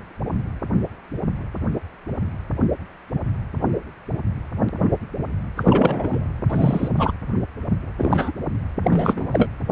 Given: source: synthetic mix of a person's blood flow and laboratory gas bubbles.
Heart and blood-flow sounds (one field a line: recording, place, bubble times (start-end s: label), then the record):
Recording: Doppler ultrasound of blood flow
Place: precordium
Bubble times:
5.57-6.25 s: bubbles
6.50-6.88 s: bubbles
6.97-7.12 s: bubbles
7.97-8.32 s: bubbles
8.82-9.48 s: bubbles
9.70-9.72 s: bubbles
From the record:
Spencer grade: 2 (many but less than half of the cardiac periods contain bubble signals, singularly or in groups)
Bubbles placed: anywhere in the cardiac cycle